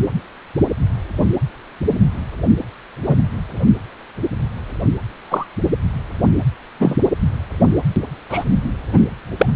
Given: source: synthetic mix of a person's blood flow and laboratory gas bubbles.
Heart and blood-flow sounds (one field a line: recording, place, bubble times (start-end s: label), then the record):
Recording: Doppler ultrasound of blood flow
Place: precordium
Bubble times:
3.06-3.16 s: bubbles
5.30-5.46 s: bubbles
6.80-6.98 s: bubbles
8.29-8.44 s: bubbles
8.93-9.01 s: bubbles
9.38-9.46 s: bubbles
From the record:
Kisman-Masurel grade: 123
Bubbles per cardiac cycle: 1 to 2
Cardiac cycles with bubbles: 10 to 50%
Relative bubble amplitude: loud (0.450 to 0.775)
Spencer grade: 2 (many but less than half of the cardiac periods contain bubble signals, singularly or in groups)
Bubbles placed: anywhere in the cardiac cycle